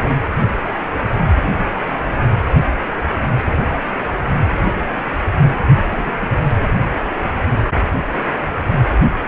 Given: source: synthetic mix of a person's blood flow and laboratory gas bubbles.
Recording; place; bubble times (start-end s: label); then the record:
Doppler ultrasound of blood flow; precordium
5.90-6.11 s: bubbles
6.21-6.32 s: bubbles
From the record:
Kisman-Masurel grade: 111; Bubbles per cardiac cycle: 1 to 2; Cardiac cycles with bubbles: 1 to 10%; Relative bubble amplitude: barely perceptible (0.100 to 0.250); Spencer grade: 1 (occasional bubble signal discernible with the cardiac motion signal, with majority of cardiac periods free of bubbles); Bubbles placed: anywhere in the cardiac cycle